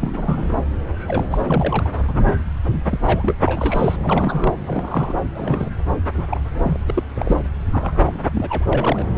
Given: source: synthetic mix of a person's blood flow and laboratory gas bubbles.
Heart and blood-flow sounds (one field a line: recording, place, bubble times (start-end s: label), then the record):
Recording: Doppler ultrasound of blood flow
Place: subclavian vein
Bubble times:
0.01-0.58 s: bubbles
1.00-1.27 s: bubbles
1.30-1.91 s: bubbles
1.96-2.00 s: bubbles
2.08-2.35 s: bubbles
2.67-3.01 s: bubbles
3.05-3.35 s: bubbles
3.44-3.96 s: bubbles
4.02-4.56 s: bubbles
4.66-5.13 s: bubbles
5.34-5.71 s: bubbles
6.15-6.25 s: bubbles
6.29-6.41 s: bubbles
6.63-6.79 s: bubbles
6.88-6.92 s: bubbles
6.95-7.03 s: bubbles
7.14-7.41 s: bubbles
7.72-8.20 s: bubbles
8.32-8.66 s: bubbles
8.71-9.05 s: bubbles
From the record:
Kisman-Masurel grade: 242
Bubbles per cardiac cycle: several, 3 to 8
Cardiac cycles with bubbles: 100%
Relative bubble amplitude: moderate (0.250 to 0.450)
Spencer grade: 3 (all of the cardiac periods contain showers or single bubble signals, but not dominating or overriding the cardiac motion signals)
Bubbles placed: anywhere in the cardiac cycle